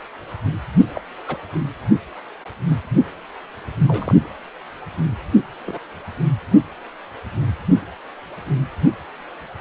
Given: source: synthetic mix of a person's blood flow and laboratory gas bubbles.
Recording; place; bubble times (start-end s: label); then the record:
Doppler ultrasound of blood flow; precordium
0.94-1.01 s: bubbles
1.27-1.38 s: bubbles
3.87-4.17 s: bubbles
5.66-5.79 s: bubbles
From the record:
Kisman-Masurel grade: 121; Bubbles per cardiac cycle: 1 to 2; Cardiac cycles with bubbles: 10 to 50%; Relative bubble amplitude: barely perceptible (0.100 to 0.250); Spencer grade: 2 (many but less than half of the cardiac periods contain bubble signals, singularly or in groups); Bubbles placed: anywhere in the cardiac cycle